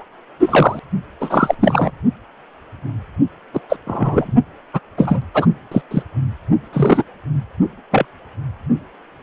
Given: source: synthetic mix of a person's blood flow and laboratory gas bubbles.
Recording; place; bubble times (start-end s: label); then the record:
Doppler ultrasound of blood flow; precordium
0.00-0.04 s: bubbles
0.39-0.80 s: bubbles
1.20-1.55 s: bubbles
1.60-1.91 s: bubbles
3.53-3.61 s: bubbles
3.69-3.76 s: bubbles
3.87-4.34 s: bubbles
4.73-4.80 s: bubbles
4.97-5.22 s: bubbles
5.33-5.46 s: bubbles
5.71-5.82 s: bubbles
5.91-6.03 s: bubbles
6.72-7.04 s: bubbles
7.91-8.05 s: bubbles
From the record:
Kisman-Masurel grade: 233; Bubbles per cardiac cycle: several, 3 to 8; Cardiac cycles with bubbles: 50 to 99%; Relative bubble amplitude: loud (0.450 to 0.775); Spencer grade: 3 (all of the cardiac periods contain showers or single bubble signals, but not dominating or overriding the cardiac motion signals); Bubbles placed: only in the low amplitude regions of the cardiac cycle